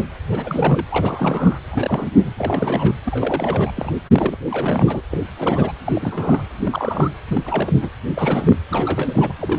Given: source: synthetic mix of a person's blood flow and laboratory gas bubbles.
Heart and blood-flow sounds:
Doppler ultrasound of blood flow; precordium
0.00-0.02 s: bubbles
0.28-0.85 s: bubbles
0.91-1.59 s: bubbles
1.71-2.09 s: bubbles
2.21-2.33 s: bubbles
2.38-2.94 s: bubbles
3.04-3.71 s: bubbles
3.75-3.91 s: bubbles
4.13-4.37 s: bubbles
4.46-5.01 s: bubbles
5.11-5.25 s: bubbles
5.38-5.72 s: bubbles
5.85-6.42 s: bubbles
6.58-7.11 s: bubbles
7.28-7.73 s: bubbles
7.82-7.90 s: bubbles
8.13-8.56 s: bubbles
8.70-9.34 s: bubbles
9.39-9.59 s: bubbles
From the record:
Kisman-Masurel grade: 342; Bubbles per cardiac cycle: rolling drumbeat, 9 or more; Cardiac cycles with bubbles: 100%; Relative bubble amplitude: moderate (0.250 to 0.450); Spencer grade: 3 (all of the cardiac periods contain showers or single bubble signals, but not dominating or overriding the cardiac motion signals); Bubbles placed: anywhere in the cardiac cycle

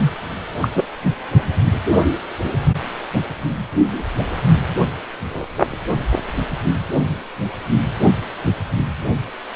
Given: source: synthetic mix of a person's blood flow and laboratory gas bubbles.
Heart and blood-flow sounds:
Doppler ultrasound of blood flow; precordium
0.00-0.12 s: bubbles
0.61-0.68 s: bubbles
0.75-0.83 s: bubbles
From the record:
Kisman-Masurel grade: 223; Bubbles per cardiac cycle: several, 3 to 8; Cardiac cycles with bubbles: 10 to 50%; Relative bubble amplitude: loud (0.450 to 0.775); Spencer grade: 2 (many but less than half of the cardiac periods contain bubble signals, singularly or in groups); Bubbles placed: only in the low amplitude regions of the cardiac cycle

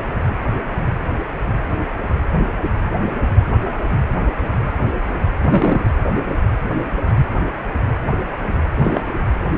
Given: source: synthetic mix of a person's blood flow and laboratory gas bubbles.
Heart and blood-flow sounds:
Doppler ultrasound of blood flow; precordium
5.43-5.89 s: bubbles
8.76-9.11 s: bubbles
From the record:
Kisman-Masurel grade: 213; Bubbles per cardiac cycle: several, 3 to 8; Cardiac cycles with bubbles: 1 to 10%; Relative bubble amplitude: loud (0.450 to 0.775); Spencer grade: 1 (occasional bubble signal discernible with the cardiac motion signal, with majority of cardiac periods free of bubbles); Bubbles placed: anywhere in the cardiac cycle

